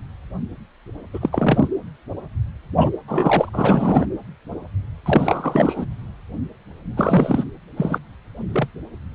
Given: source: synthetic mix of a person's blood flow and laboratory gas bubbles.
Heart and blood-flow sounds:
Doppler ultrasound of blood flow; precordium
1.14-1.29 s: bubbles
1.32-1.67 s: bubbles
2.80-2.90 s: bubbles
3.08-3.50 s: bubbles
3.53-4.06 s: bubbles
5.05-5.86 s: bubbles
6.96-7.44 s: bubbles
7.77-7.98 s: bubbles
8.38-8.71 s: bubbles
From the record:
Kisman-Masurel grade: 233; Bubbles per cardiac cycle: several, 3 to 8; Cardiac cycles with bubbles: 50 to 99%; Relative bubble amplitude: loud (0.450 to 0.775); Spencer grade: 3 (all of the cardiac periods contain showers or single bubble signals, but not dominating or overriding the cardiac motion signals); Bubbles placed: anywhere in the cardiac cycle

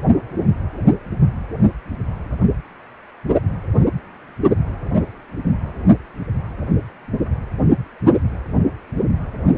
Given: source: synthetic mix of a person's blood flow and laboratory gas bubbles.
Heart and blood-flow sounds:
Doppler ultrasound of blood flow; precordium
no bubbles
From the record:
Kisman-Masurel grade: 000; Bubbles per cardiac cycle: 0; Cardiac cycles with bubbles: 0%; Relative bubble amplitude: no bubbles discernible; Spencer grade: 0 (complete lack of bubble signals)

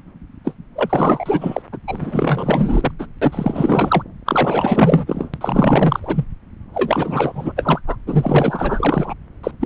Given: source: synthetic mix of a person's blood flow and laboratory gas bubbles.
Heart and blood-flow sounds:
Doppler ultrasound of blood flow; subclavian vein
0.44-0.54 s: bubbles
0.76-1.62 s: bubbles
1.72-1.78 s: bubbles
1.88-2.92 s: bubbles
2.98-3.07 s: bubbles
3.21-4.03 s: bubbles
4.25-5.29 s: bubbles
5.33-6.00 s: bubbles
6.03-6.25 s: bubbles
6.74-7.53 s: bubbles
7.56-7.81 s: bubbles
7.87-7.96 s: bubbles
8.06-9.14 s: bubbles
9.43-9.51 s: bubbles
9.60-9.66 s: bubbles
From the record:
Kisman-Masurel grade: 444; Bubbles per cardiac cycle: continuous sound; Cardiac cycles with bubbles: 100%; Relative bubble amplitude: maximal (0.775 to 0.999); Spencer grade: 4 (maximum detectable bubble signal sounding continuously throughout systole and diastole of every cardiac period, and overriding the amplitude of the normal cardiac signals); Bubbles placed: anywhere in the cardiac cycle

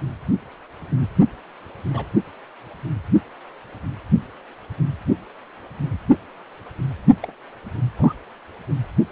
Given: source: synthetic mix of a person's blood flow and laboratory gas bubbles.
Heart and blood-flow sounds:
Doppler ultrasound of blood flow; precordium
0.00-0.03 s: bubbles
1.93-2.06 s: bubbles
7.23-7.34 s: bubbles
7.96-8.13 s: bubbles
From the record:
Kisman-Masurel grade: 121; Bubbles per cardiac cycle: 1 to 2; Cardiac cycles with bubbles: 10 to 50%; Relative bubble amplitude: barely perceptible (0.100 to 0.250); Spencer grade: 2 (many but less than half of the cardiac periods contain bubble signals, singularly or in groups); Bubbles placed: only in the low amplitude regions of the cardiac cycle

